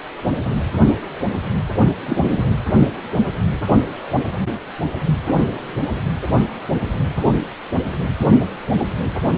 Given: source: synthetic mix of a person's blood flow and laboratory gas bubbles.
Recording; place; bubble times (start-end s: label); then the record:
Doppler ultrasound of blood flow; precordium
2.06-2.51 s: bubbles
From the record:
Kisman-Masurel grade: 113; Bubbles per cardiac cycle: 1 to 2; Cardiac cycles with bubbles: 1 to 10%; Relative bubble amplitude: loud (0.450 to 0.775); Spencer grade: 1 (occasional bubble signal discernible with the cardiac motion signal, with majority of cardiac periods free of bubbles); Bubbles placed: anywhere in the cardiac cycle